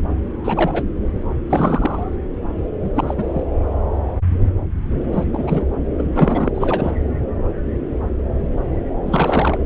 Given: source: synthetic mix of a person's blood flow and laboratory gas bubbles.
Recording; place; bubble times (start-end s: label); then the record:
Doppler ultrasound of blood flow; subclavian vein
0.44-0.84 s: bubbles
1.50-2.03 s: bubbles
2.82-2.90 s: bubbles
2.95-3.15 s: bubbles
3.17-3.43 s: bubbles
5.13-5.24 s: bubbles
5.33-5.66 s: bubbles
5.98-6.04 s: bubbles
6.15-6.51 s: bubbles
6.54-6.97 s: bubbles
9.05-9.59 s: bubbles
From the record:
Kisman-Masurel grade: 233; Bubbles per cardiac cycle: several, 3 to 8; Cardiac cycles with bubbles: 50 to 99%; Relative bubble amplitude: loud (0.450 to 0.775); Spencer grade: 3 (all of the cardiac periods contain showers or single bubble signals, but not dominating or overriding the cardiac motion signals); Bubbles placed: anywhere in the cardiac cycle